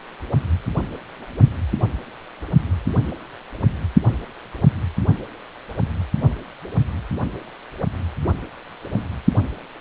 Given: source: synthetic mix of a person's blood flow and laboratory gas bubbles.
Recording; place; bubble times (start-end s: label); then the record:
Doppler ultrasound of blood flow; precordium
1.21-1.25 s: bubbles
From the record:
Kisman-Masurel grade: 111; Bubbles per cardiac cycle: 1 to 2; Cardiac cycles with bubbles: 1 to 10%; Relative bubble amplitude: barely perceptible (0.100 to 0.250); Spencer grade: 1 (occasional bubble signal discernible with the cardiac motion signal, with majority of cardiac periods free of bubbles); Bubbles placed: only in the low amplitude regions of the cardiac cycle